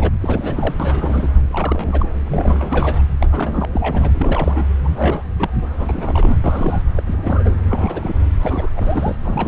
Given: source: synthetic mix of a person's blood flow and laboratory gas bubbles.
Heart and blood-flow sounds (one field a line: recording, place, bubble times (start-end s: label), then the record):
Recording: Doppler ultrasound of blood flow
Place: subclavian vein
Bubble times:
0.00-0.10 s: bubbles
0.21-0.75 s: bubbles
0.79-1.30 s: bubbles
1.49-2.11 s: bubbles
2.26-3.02 s: bubbles
3.20-3.65 s: bubbles
3.72-4.12 s: bubbles
4.18-4.66 s: bubbles
4.83-5.22 s: bubbles
5.35-5.50 s: bubbles
5.76-6.37 s: bubbles
6.44-6.82 s: bubbles
6.95-7.02 s: bubbles
7.06-7.55 s: bubbles
7.66-8.16 s: bubbles
8.41-8.70 s: bubbles
8.75-9.18 s: bubbles
9.23-9.48 s: bubbles
From the record:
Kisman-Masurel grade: 342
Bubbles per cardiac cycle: rolling drumbeat, 9 or more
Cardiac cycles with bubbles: 100%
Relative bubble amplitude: moderate (0.250 to 0.450)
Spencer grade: 3 (all of the cardiac periods contain showers or single bubble signals, but not dominating or overriding the cardiac motion signals)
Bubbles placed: anywhere in the cardiac cycle